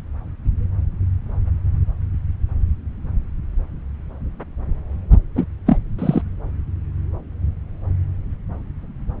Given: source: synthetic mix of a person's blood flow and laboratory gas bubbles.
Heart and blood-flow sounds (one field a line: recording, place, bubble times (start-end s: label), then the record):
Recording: Doppler ultrasound of blood flow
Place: subclavian vein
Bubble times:
5.34-5.45 s: bubbles
5.66-5.77 s: bubbles
5.99-6.21 s: bubbles
From the record:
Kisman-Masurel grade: 123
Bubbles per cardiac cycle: 1 to 2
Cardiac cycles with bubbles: 10 to 50%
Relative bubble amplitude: loud (0.450 to 0.775)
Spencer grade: 2 (many but less than half of the cardiac periods contain bubble signals, singularly or in groups)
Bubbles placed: anywhere in the cardiac cycle